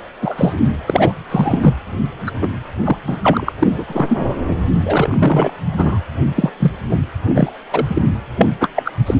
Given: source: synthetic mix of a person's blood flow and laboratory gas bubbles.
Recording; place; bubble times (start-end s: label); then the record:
Doppler ultrasound of blood flow; precordium
0.22-0.54 s: bubbles
0.87-1.14 s: bubbles
1.29-1.74 s: bubbles
2.27-2.31 s: bubbles
2.42-2.48 s: bubbles
2.84-2.97 s: bubbles
3.06-3.17 s: bubbles
3.22-3.53 s: bubbles
3.59-3.84 s: bubbles
3.88-4.18 s: bubbles
4.84-5.50 s: bubbles
5.76-5.98 s: bubbles
6.35-6.50 s: bubbles
6.59-6.71 s: bubbles
6.90-6.96 s: bubbles
7.23-7.53 s: bubbles
7.72-7.86 s: bubbles
7.88-8.02 s: bubbles
8.36-8.46 s: bubbles
8.60-8.69 s: bubbles
8.75-8.93 s: bubbles
9.06-9.14 s: bubbles
From the record:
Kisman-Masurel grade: 243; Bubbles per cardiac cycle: several, 3 to 8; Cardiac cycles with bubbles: 100%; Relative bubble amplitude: loud (0.450 to 0.775); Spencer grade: 3 (all of the cardiac periods contain showers or single bubble signals, but not dominating or overriding the cardiac motion signals); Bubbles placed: anywhere in the cardiac cycle